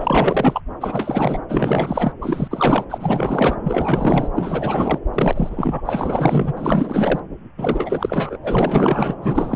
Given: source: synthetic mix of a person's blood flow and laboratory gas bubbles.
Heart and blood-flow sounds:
Doppler ultrasound of blood flow; subclavian vein
0.00-0.61 s: bubbles
0.81-1.41 s: bubbles
1.48-2.12 s: bubbles
2.21-2.84 s: bubbles
2.90-3.56 s: bubbles
3.63-4.28 s: bubbles
4.35-4.98 s: bubbles
5.13-5.83 s: bubbles
5.85-6.53 s: bubbles
6.55-7.20 s: bubbles
7.58-8.38 s: bubbles
8.43-9.14 s: bubbles
9.21-9.56 s: bubbles
From the record:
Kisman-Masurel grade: 444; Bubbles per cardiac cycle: continuous sound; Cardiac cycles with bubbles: 100%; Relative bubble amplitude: maximal (0.775 to 0.999); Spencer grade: 4 (maximum detectable bubble signal sounding continuously throughout systole and diastole of every cardiac period, and overriding the amplitude of the normal cardiac signals); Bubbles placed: anywhere in the cardiac cycle

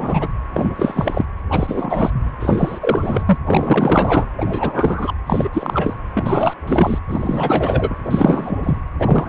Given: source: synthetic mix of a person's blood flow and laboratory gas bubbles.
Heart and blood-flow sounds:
Doppler ultrasound of blood flow; precordium
0.00-0.28 s: bubbles
0.54-0.70 s: bubbles
0.76-1.25 s: bubbles
1.50-2.10 s: bubbles
2.40-3.23 s: bubbles
3.26-3.38 s: bubbles
3.46-4.26 s: bubbles
4.37-5.14 s: bubbles
5.26-5.50 s: bubbles
5.53-5.95 s: bubbles
6.11-6.54 s: bubbles
6.67-6.99 s: bubbles
7.08-7.95 s: bubbles
8.05-8.81 s: bubbles
8.99-9.29 s: bubbles
From the record:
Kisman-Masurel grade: 333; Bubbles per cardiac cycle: rolling drumbeat, 9 or more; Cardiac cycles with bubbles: 50 to 99%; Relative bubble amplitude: loud (0.450 to 0.775); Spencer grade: 3 (all of the cardiac periods contain showers or single bubble signals, but not dominating or overriding the cardiac motion signals); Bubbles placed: anywhere in the cardiac cycle

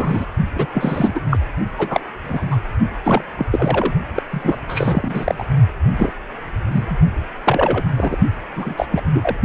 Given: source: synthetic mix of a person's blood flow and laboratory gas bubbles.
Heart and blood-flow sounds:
Doppler ultrasound of blood flow; precordium
0.00-0.26 s: bubbles
0.56-0.66 s: bubbles
0.73-1.20 s: bubbles
1.30-1.37 s: bubbles
1.78-2.00 s: bubbles
2.24-2.58 s: bubbles
3.03-3.23 s: bubbles
3.38-3.47 s: bubbles
3.51-3.95 s: bubbles
4.15-4.23 s: bubbles
4.30-4.58 s: bubbles
4.69-5.46 s: bubbles
5.96-6.12 s: bubbles
6.71-6.98 s: bubbles
7.45-7.84 s: bubbles
7.97-8.16 s: bubbles
8.55-8.86 s: bubbles
8.91-9.01 s: bubbles
9.13-9.37 s: bubbles
From the record:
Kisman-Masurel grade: 243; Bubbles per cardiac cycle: several, 3 to 8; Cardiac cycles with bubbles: 100%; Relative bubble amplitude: loud (0.450 to 0.775); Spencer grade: 3 (all of the cardiac periods contain showers or single bubble signals, but not dominating or overriding the cardiac motion signals); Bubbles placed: only in the low amplitude regions of the cardiac cycle

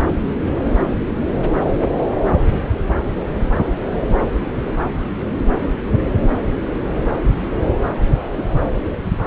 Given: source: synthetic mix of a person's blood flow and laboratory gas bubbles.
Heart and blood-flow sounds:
Doppler ultrasound of blood flow; subclavian vein
8.36-8.45 s: bubbles
From the record:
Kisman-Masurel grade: 111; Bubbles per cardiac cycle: 1 to 2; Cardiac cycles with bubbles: 1 to 10%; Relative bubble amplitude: barely perceptible (0.100 to 0.250); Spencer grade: 1 (occasional bubble signal discernible with the cardiac motion signal, with majority of cardiac periods free of bubbles); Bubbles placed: anywhere in the cardiac cycle

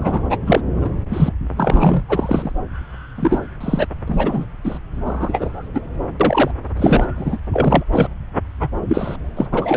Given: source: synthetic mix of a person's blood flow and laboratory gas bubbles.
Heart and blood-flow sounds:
Doppler ultrasound of blood flow; subclavian vein
0.00-0.22 s: bubbles
0.30-0.38 s: bubbles
0.47-0.60 s: bubbles
0.76-0.92 s: bubbles
1.10-1.32 s: bubbles
1.56-2.04 s: bubbles
2.08-2.53 s: bubbles
3.16-3.39 s: bubbles
3.60-3.87 s: bubbles
4.08-4.46 s: bubbles
4.64-4.79 s: bubbles
5.05-5.68 s: bubbles
5.74-5.81 s: bubbles
6.20-6.51 s: bubbles
6.77-7.05 s: bubbles
7.16-7.38 s: bubbles
7.53-7.83 s: bubbles
7.92-8.08 s: bubbles
8.60-8.69 s: bubbles
8.88-9.16 s: bubbles
9.37-9.47 s: bubbles
9.51-9.77 s: bubbles
From the record:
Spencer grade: 3 (all of the cardiac periods contain showers or single bubble signals, but not dominating or overriding the cardiac motion signals); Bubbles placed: anywhere in the cardiac cycle

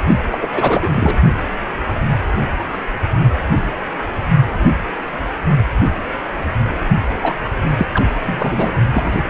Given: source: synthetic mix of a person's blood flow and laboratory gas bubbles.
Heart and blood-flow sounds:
Doppler ultrasound of blood flow; precordium
0.29-0.39 s: bubbles
0.42-0.47 s: bubbles
0.54-0.88 s: bubbles
0.92-1.17 s: bubbles
7.22-7.33 s: bubbles
7.77-7.87 s: bubbles
7.94-8.05 s: bubbles
8.22-8.71 s: bubbles
8.92-9.30 s: bubbles
From the record:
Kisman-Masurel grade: 333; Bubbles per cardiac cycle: rolling drumbeat, 9 or more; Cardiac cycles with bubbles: 50 to 99%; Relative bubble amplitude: loud (0.450 to 0.775); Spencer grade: 3 (all of the cardiac periods contain showers or single bubble signals, but not dominating or overriding the cardiac motion signals); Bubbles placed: only in the low amplitude regions of the cardiac cycle

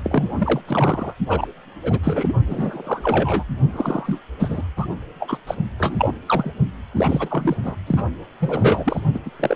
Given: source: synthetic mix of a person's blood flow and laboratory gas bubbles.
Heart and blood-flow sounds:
Doppler ultrasound of blood flow; precordium
0.04-0.60 s: bubbles
0.66-1.14 s: bubbles
1.27-1.47 s: bubbles
1.82-2.00 s: bubbles
2.03-2.33 s: bubbles
2.47-3.45 s: bubbles
3.72-4.20 s: bubbles
4.39-4.62 s: bubbles
4.77-4.86 s: bubbles
5.20-5.38 s: bubbles
5.47-5.55 s: bubbles
5.79-6.13 s: bubbles
6.26-6.53 s: bubbles
6.95-7.57 s: bubbles
7.63-7.75 s: bubbles
7.87-8.04 s: bubbles
8.40-9.00 s: bubbles
9.14-9.19 s: bubbles
9.25-9.30 s: bubbles
9.39-9.56 s: bubbles
From the record:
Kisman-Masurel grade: 342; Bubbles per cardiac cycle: rolling drumbeat, 9 or more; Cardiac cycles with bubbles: 100%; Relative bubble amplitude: moderate (0.250 to 0.450); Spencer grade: 3 (all of the cardiac periods contain showers or single bubble signals, but not dominating or overriding the cardiac motion signals); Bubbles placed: only in the low amplitude regions of the cardiac cycle

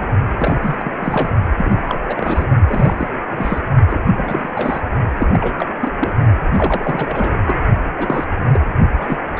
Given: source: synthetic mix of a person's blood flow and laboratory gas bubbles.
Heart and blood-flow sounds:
Doppler ultrasound of blood flow; precordium
0.00-0.07 s: bubbles
0.39-0.93 s: bubbles
0.99-1.30 s: bubbles
1.58-2.48 s: bubbles
2.66-3.08 s: bubbles
3.31-3.61 s: bubbles
3.88-4.00 s: bubbles
4.15-4.53 s: bubbles
4.55-4.82 s: bubbles
5.17-5.27 s: bubbles
5.32-5.67 s: bubbles
5.81-5.91 s: bubbles
6.00-6.13 s: bubbles
6.53-7.33 s: bubbles
7.46-7.54 s: bubbles
7.97-8.24 s: bubbles
8.30-8.43 s: bubbles
8.53-8.61 s: bubbles
9.01-9.18 s: bubbles
9.36-9.40 s: bubbles
From the record:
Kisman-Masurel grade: 342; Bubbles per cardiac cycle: rolling drumbeat, 9 or more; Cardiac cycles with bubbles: 100%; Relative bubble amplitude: moderate (0.250 to 0.450); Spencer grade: 3 (all of the cardiac periods contain showers or single bubble signals, but not dominating or overriding the cardiac motion signals); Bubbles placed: only in the low amplitude regions of the cardiac cycle

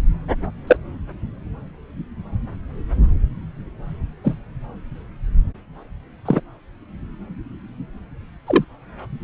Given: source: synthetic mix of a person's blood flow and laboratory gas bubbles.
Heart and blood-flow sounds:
Doppler ultrasound of blood flow; subclavian vein
0.67-0.76 s: bubbles
4.23-4.35 s: bubbles
6.25-6.40 s: bubbles
8.46-8.64 s: bubbles
From the record:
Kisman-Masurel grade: 123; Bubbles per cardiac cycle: 1 to 2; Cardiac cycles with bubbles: 10 to 50%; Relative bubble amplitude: loud (0.450 to 0.775); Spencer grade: 2 (many but less than half of the cardiac periods contain bubble signals, singularly or in groups); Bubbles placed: anywhere in the cardiac cycle

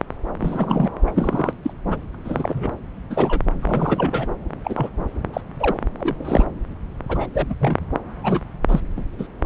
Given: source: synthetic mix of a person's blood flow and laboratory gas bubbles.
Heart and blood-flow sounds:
Doppler ultrasound of blood flow; subclavian vein
0.39-0.90 s: bubbles
1.06-1.12 s: bubbles
1.16-1.53 s: bubbles
1.64-1.73 s: bubbles
1.89-1.99 s: bubbles
2.14-2.16 s: bubbles
2.25-2.70 s: bubbles
3.10-3.41 s: bubbles
3.62-4.28 s: bubbles
4.64-4.90 s: bubbles
5.33-5.41 s: bubbles
5.59-5.78 s: bubbles
5.98-6.45 s: bubbles
7.08-7.27 s: bubbles
7.33-7.46 s: bubbles
7.50-7.54 s: bubbles
7.60-7.77 s: bubbles
8.23-8.40 s: bubbles
8.68-8.80 s: bubbles
8.96-9.04 s: bubbles
9.18-9.27 s: bubbles
From the record:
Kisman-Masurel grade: 232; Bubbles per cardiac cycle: several, 3 to 8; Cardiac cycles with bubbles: 50 to 99%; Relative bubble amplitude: moderate (0.250 to 0.450); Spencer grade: 3 (all of the cardiac periods contain showers or single bubble signals, but not dominating or overriding the cardiac motion signals); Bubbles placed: anywhere in the cardiac cycle

